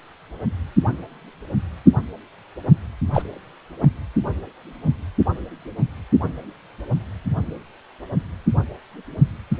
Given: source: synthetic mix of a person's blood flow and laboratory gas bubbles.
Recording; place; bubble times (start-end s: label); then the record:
Doppler ultrasound of blood flow; precordium
3.13-3.22 s: bubbles
3.81-3.90 s: bubbles
From the record:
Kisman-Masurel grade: 112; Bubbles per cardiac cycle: 1 to 2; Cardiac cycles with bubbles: 1 to 10%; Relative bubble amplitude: moderate (0.250 to 0.450); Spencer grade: 1 (occasional bubble signal discernible with the cardiac motion signal, with majority of cardiac periods free of bubbles); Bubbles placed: anywhere in the cardiac cycle